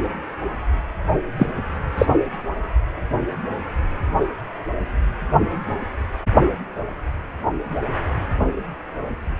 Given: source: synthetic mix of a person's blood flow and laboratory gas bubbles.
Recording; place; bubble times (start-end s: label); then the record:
Doppler ultrasound of blood flow; precordium
1.39-1.47 s: bubbles
1.98-2.06 s: bubbles
From the record:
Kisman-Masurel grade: 123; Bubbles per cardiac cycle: 1 to 2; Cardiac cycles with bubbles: 10 to 50%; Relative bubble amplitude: loud (0.450 to 0.775); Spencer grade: 2 (many but less than half of the cardiac periods contain bubble signals, singularly or in groups); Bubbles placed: anywhere in the cardiac cycle